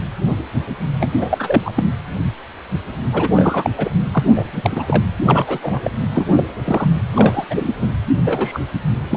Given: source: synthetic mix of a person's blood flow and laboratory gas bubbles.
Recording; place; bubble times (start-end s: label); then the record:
Doppler ultrasound of blood flow; precordium
1.00-1.73 s: bubbles
1.76-1.83 s: bubbles
3.12-3.70 s: bubbles
3.77-3.90 s: bubbles
4.12-4.23 s: bubbles
4.35-4.48 s: bubbles
4.52-5.02 s: bubbles
5.26-5.58 s: bubbles
5.62-5.81 s: bubbles
5.83-5.91 s: bubbles
6.13-6.28 s: bubbles
6.36-6.43 s: bubbles
6.64-6.88 s: bubbles
7.14-7.44 s: bubbles
7.50-7.71 s: bubbles
7.81-7.88 s: bubbles
8.25-8.60 s: bubbles
9.10-9.17 s: bubbles
From the record:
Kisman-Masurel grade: 233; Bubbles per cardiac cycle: several, 3 to 8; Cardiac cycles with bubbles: 50 to 99%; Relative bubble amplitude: loud (0.450 to 0.775); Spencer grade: 3 (all of the cardiac periods contain showers or single bubble signals, but not dominating or overriding the cardiac motion signals); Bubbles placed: anywhere in the cardiac cycle